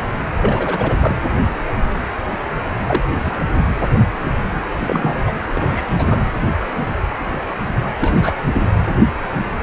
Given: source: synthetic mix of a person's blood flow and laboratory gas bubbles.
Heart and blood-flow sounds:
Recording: Doppler ultrasound of blood flow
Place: precordium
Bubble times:
0.41-0.97 s: bubbles
1.00-1.15 s: bubbles
2.81-3.01 s: bubbles
3.26-3.31 s: bubbles
4.79-5.23 s: bubbles
5.27-5.32 s: bubbles
5.54-6.21 s: bubbles
7.98-8.34 s: bubbles
8.54-8.62 s: bubbles
From the record:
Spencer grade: 2 (many but less than half of the cardiac periods contain bubble signals, singularly or in groups)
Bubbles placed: anywhere in the cardiac cycle

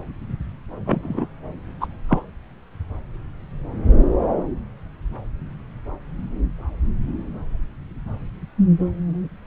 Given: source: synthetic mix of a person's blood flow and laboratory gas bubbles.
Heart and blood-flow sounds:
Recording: Doppler ultrasound of blood flow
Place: subclavian vein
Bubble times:
0.85-1.27 s: bubbles
1.80-1.87 s: bubbles
2.08-2.22 s: bubbles
From the record:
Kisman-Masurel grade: 213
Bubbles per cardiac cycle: several, 3 to 8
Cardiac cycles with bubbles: 1 to 10%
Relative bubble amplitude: loud (0.450 to 0.775)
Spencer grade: 1 (occasional bubble signal discernible with the cardiac motion signal, with majority of cardiac periods free of bubbles)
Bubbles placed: anywhere in the cardiac cycle

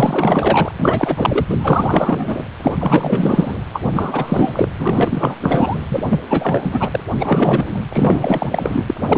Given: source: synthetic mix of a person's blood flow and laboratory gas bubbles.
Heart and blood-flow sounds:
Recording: Doppler ultrasound of blood flow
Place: precordium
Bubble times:
0.00-0.72 s: bubbles
0.78-1.46 s: bubbles
1.49-1.57 s: bubbles
1.60-2.44 s: bubbles
2.62-3.57 s: bubbles
3.73-3.82 s: bubbles
3.92-4.68 s: bubbles
4.79-5.36 s: bubbles
5.41-5.77 s: bubbles
5.90-6.07 s: bubbles
6.10-6.21 s: bubbles
6.29-6.89 s: bubbles
6.91-7.00 s: bubbles
7.20-7.79 s: bubbles
7.89-8.85 s: bubbles
8.88-8.94 s: bubbles
9.01-9.18 s: bubbles
From the record:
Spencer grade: 4 (maximum detectable bubble signal sounding continuously throughout systole and diastole of every cardiac period, and overriding the amplitude of the normal cardiac signals)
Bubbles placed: anywhere in the cardiac cycle

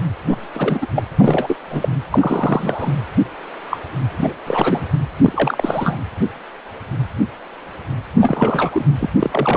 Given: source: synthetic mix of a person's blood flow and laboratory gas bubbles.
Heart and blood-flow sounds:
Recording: Doppler ultrasound of blood flow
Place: precordium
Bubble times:
0.28-0.36 s: bubbles
0.54-0.86 s: bubbles
0.94-1.03 s: bubbles
1.19-1.57 s: bubbles
1.70-1.89 s: bubbles
2.11-2.93 s: bubbles
3.71-3.77 s: bubbles
4.11-4.33 s: bubbles
4.47-4.86 s: bubbles
5.25-5.98 s: bubbles
8.21-8.86 s: bubbles
9.00-9.10 s: bubbles
9.21-9.56 s: bubbles
From the record:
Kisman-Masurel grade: 332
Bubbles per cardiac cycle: rolling drumbeat, 9 or more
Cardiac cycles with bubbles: 50 to 99%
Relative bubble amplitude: moderate (0.250 to 0.450)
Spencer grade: 3 (all of the cardiac periods contain showers or single bubble signals, but not dominating or overriding the cardiac motion signals)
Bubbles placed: anywhere in the cardiac cycle

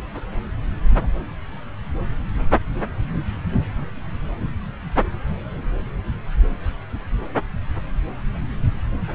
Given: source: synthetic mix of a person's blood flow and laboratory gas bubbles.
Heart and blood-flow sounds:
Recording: Doppler ultrasound of blood flow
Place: subclavian vein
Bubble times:
no bubbles
From the record:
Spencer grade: 0 (complete lack of bubble signals)

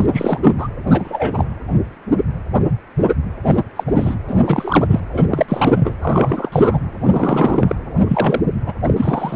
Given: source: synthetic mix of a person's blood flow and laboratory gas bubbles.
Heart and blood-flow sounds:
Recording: Doppler ultrasound of blood flow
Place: precordium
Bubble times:
0.00-0.07 s: bubbles
0.12-0.40 s: bubbles
0.44-0.53 s: bubbles
0.57-0.68 s: bubbles
0.85-1.47 s: bubbles
3.45-3.63 s: bubbles
3.75-3.83 s: bubbles
3.87-3.92 s: bubbles
3.96-4.15 s: bubbles
4.28-5.00 s: bubbles
5.12-5.25 s: bubbles
5.31-5.93 s: bubbles
6.02-6.49 s: bubbles
6.52-6.79 s: bubbles
7.02-7.75 s: bubbles
8.08-8.41 s: bubbles
8.66-8.72 s: bubbles
8.86-9.36 s: bubbles
From the record:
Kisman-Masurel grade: 333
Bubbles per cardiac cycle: rolling drumbeat, 9 or more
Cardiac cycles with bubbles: 50 to 99%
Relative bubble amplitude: loud (0.450 to 0.775)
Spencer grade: 3 (all of the cardiac periods contain showers or single bubble signals, but not dominating or overriding the cardiac motion signals)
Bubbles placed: anywhere in the cardiac cycle

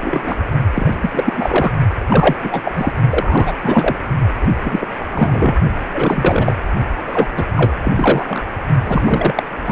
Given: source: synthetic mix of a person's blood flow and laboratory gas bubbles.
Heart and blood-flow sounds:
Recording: Doppler ultrasound of blood flow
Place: precordium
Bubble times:
0.01-0.36 s: bubbles
0.73-0.94 s: bubbles
1.01-1.33 s: bubbles
1.36-1.73 s: bubbles
2.09-2.37 s: bubbles
2.43-2.72 s: bubbles
2.76-2.92 s: bubbles
3.09-3.52 s: bubbles
3.62-3.96 s: bubbles
4.40-4.47 s: bubbles
4.63-4.88 s: bubbles
5.10-5.55 s: bubbles
5.94-6.54 s: bubbles
7.06-7.27 s: bubbles
7.36-7.44 s: bubbles
7.56-7.72 s: bubbles
7.81-8.45 s: bubbles
8.83-9.43 s: bubbles
9.65-9.72 s: bubbles
From the record:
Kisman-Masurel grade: 343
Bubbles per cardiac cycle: rolling drumbeat, 9 or more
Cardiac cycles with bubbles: 100%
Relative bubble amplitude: loud (0.450 to 0.775)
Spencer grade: 3 (all of the cardiac periods contain showers or single bubble signals, but not dominating or overriding the cardiac motion signals)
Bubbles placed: only in the low amplitude regions of the cardiac cycle

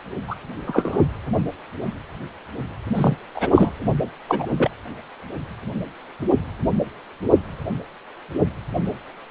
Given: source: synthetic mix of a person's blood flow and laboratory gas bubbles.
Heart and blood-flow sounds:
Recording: Doppler ultrasound of blood flow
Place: precordium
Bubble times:
0.28-0.35 s: bubbles
0.67-1.00 s: bubbles
2.93-3.16 s: bubbles
3.35-3.72 s: bubbles
4.27-4.46 s: bubbles
4.52-4.69 s: bubbles
From the record:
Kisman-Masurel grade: 223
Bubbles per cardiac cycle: several, 3 to 8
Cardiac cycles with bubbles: 10 to 50%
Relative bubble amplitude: loud (0.450 to 0.775)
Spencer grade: 2 (many but less than half of the cardiac periods contain bubble signals, singularly or in groups)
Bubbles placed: anywhere in the cardiac cycle

